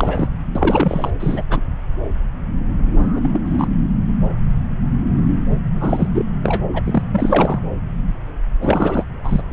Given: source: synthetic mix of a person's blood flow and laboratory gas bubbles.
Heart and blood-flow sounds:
Doppler ultrasound of blood flow; subclavian vein
0.00-0.28 s: bubbles
0.55-1.11 s: bubbles
1.20-1.43 s: bubbles
1.49-1.60 s: bubbles
2.96-3.39 s: bubbles
3.45-3.67 s: bubbles
5.75-6.09 s: bubbles
6.14-6.25 s: bubbles
6.43-6.63 s: bubbles
6.72-6.81 s: bubbles
6.84-7.02 s: bubbles
7.11-7.61 s: bubbles
8.62-9.04 s: bubbles
9.24-9.42 s: bubbles
9.50-9.53 s: bubbles
From the record:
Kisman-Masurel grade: 233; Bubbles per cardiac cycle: several, 3 to 8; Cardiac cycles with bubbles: 50 to 99%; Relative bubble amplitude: loud (0.450 to 0.775); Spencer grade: 3 (all of the cardiac periods contain showers or single bubble signals, but not dominating or overriding the cardiac motion signals); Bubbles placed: anywhere in the cardiac cycle

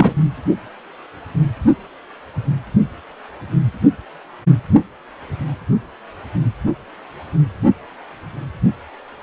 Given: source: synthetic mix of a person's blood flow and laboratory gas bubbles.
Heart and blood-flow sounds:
Doppler ultrasound of blood flow; precordium
0.00-0.14 s: bubbles
From the record:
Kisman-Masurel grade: 213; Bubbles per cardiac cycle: several, 3 to 8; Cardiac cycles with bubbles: 1 to 10%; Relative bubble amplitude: loud (0.450 to 0.775); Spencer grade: 1 (occasional bubble signal discernible with the cardiac motion signal, with majority of cardiac periods free of bubbles); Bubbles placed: anywhere in the cardiac cycle

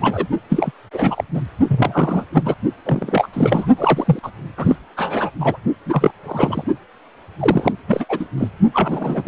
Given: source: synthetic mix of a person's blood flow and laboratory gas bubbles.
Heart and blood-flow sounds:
Doppler ultrasound of blood flow; precordium
0.01-0.27 s: bubbles
0.49-0.71 s: bubbles
0.93-1.24 s: bubbles
1.34-1.41 s: bubbles
1.68-2.25 s: bubbles
2.33-2.54 s: bubbles
2.85-3.28 s: bubbles
3.33-3.68 s: bubbles
3.77-4.20 s: bubbles
4.22-4.30 s: bubbles
4.57-4.76 s: bubbles
4.96-5.30 s: bubbles
5.39-5.58 s: bubbles
5.86-6.11 s: bubbles
6.23-6.64 s: bubbles
7.39-7.72 s: bubbles
7.87-8.06 s: bubbles
8.09-8.26 s: bubbles
8.38-8.48 s: bubbles
8.73-9.27 s: bubbles
From the record:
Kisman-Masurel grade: 343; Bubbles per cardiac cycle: rolling drumbeat, 9 or more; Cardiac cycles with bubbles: 100%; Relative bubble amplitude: loud (0.450 to 0.775); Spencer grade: 3 (all of the cardiac periods contain showers or single bubble signals, but not dominating or overriding the cardiac motion signals); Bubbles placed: only in the low amplitude regions of the cardiac cycle

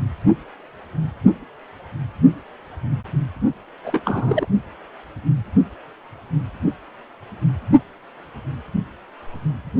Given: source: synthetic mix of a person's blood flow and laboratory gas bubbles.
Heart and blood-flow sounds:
Doppler ultrasound of blood flow; precordium
3.84-4.00 s: bubbles
4.05-4.47 s: bubbles
From the record:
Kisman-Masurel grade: 212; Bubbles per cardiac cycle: several, 3 to 8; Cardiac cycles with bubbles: 1 to 10%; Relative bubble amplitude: moderate (0.250 to 0.450); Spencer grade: 1 (occasional bubble signal discernible with the cardiac motion signal, with majority of cardiac periods free of bubbles); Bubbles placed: only in the low amplitude regions of the cardiac cycle

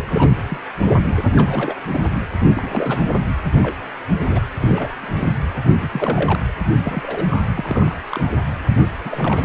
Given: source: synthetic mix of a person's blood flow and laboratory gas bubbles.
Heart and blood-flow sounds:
Doppler ultrasound of blood flow; precordium
0.00-0.35 s: bubbles
0.48-0.57 s: bubbles
1.35-1.80 s: bubbles
1.91-2.01 s: bubbles
2.55-3.02 s: bubbles
3.62-3.75 s: bubbles
4.20-4.45 s: bubbles
4.60-4.89 s: bubbles
5.01-5.37 s: bubbles
5.80-6.39 s: bubbles
6.76-7.25 s: bubbles
7.29-7.42 s: bubbles
7.55-7.95 s: bubbles
8.10-8.29 s: bubbles
8.69-8.78 s: bubbles
9.04-9.44 s: bubbles
From the record:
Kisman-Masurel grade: 242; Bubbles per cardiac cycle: several, 3 to 8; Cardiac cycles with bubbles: 100%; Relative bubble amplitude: moderate (0.250 to 0.450); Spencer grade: 3 (all of the cardiac periods contain showers or single bubble signals, but not dominating or overriding the cardiac motion signals); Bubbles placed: anywhere in the cardiac cycle

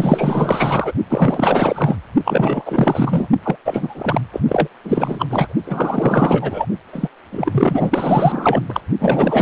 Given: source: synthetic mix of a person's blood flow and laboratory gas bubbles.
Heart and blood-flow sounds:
Doppler ultrasound of blood flow; precordium
0.00-0.92 s: bubbles
1.09-1.97 s: bubbles
2.24-3.27 s: bubbles
3.43-3.56 s: bubbles
3.65-4.21 s: bubbles
4.33-4.41 s: bubbles
4.47-4.68 s: bubbles
4.84-5.26 s: bubbles
5.29-5.54 s: bubbles
5.66-6.66 s: bubbles
6.92-7.08 s: bubbles
7.31-8.61 s: bubbles
8.69-8.81 s: bubbles
8.99-9.42 s: bubbles
From the record:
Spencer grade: 4 (maximum detectable bubble signal sounding continuously throughout systole and diastole of every cardiac period, and overriding the amplitude of the normal cardiac signals); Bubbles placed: only in the low amplitude regions of the cardiac cycle

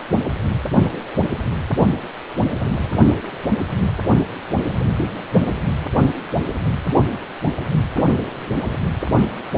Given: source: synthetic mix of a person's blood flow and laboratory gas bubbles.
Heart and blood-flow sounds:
Doppler ultrasound of blood flow; precordium
no bubbles
From the record:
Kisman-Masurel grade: 000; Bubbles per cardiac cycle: 0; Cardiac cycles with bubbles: 0%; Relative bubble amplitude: no bubbles discernible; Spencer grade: 0 (complete lack of bubble signals)

